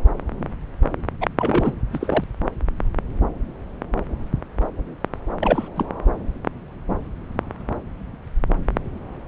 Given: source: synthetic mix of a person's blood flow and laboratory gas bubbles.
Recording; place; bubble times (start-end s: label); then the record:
Doppler ultrasound of blood flow; subclavian vein
1.21-1.28 s: bubbles
1.38-1.75 s: bubbles
1.93-2.24 s: bubbles
5.41-5.68 s: bubbles
5.76-5.85 s: bubbles
From the record:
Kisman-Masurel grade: 222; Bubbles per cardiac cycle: several, 3 to 8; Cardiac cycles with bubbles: 10 to 50%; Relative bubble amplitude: moderate (0.250 to 0.450); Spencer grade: 2 (many but less than half of the cardiac periods contain bubble signals, singularly or in groups); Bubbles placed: anywhere in the cardiac cycle